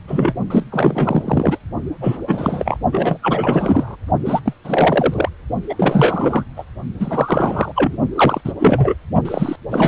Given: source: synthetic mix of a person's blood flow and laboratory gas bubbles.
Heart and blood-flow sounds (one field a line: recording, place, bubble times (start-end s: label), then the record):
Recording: Doppler ultrasound of blood flow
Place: precordium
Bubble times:
0.07-0.33 s: bubbles
0.50-0.66 s: bubbles
0.71-1.57 s: bubbles
2.00-2.17 s: bubbles
2.27-2.78 s: bubbles
2.92-3.18 s: bubbles
3.21-3.96 s: bubbles
4.25-4.40 s: bubbles
4.45-4.54 s: bubbles
4.64-5.29 s: bubbles
5.69-6.44 s: bubbles
6.57-6.64 s: bubbles
7.00-7.72 s: bubbles
7.75-7.96 s: bubbles
8.16-8.41 s: bubbles
8.44-8.53 s: bubbles
8.59-8.95 s: bubbles
9.25-9.56 s: bubbles
9.71-9.88 s: bubbles
From the record:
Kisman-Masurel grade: 343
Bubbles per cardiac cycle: rolling drumbeat, 9 or more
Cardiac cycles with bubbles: 100%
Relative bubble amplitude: loud (0.450 to 0.775)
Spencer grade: 3 (all of the cardiac periods contain showers or single bubble signals, but not dominating or overriding the cardiac motion signals)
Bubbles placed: only in the low amplitude regions of the cardiac cycle